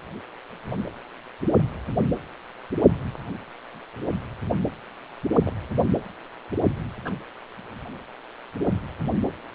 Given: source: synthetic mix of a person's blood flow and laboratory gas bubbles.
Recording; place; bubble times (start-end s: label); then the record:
Doppler ultrasound of blood flow; precordium
5.43-5.53 s: bubbles
7.05-7.12 s: bubbles
From the record:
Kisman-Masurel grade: 121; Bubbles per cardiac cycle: 1 to 2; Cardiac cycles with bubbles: 10 to 50%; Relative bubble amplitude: barely perceptible (0.100 to 0.250); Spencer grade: 2 (many but less than half of the cardiac periods contain bubble signals, singularly or in groups); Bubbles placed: anywhere in the cardiac cycle